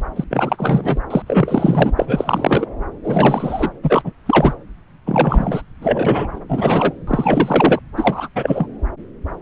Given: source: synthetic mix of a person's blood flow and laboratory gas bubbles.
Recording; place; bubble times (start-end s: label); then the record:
Doppler ultrasound of blood flow; subclavian vein
0.15-0.24 s: bubbles
0.31-1.00 s: bubbles
1.10-1.22 s: bubbles
1.27-1.91 s: bubbles
1.97-2.66 s: bubbles
3.03-3.70 s: bubbles
3.82-4.12 s: bubbles
4.25-4.54 s: bubbles
5.05-5.62 s: bubbles
5.81-6.28 s: bubbles
6.33-6.40 s: bubbles
6.49-6.92 s: bubbles
7.07-7.80 s: bubbles
7.96-8.29 s: bubbles
8.35-8.67 s: bubbles
From the record:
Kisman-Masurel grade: 333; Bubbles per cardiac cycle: rolling drumbeat, 9 or more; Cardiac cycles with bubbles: 50 to 99%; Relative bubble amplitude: loud (0.450 to 0.775); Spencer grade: 3 (all of the cardiac periods contain showers or single bubble signals, but not dominating or overriding the cardiac motion signals); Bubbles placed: anywhere in the cardiac cycle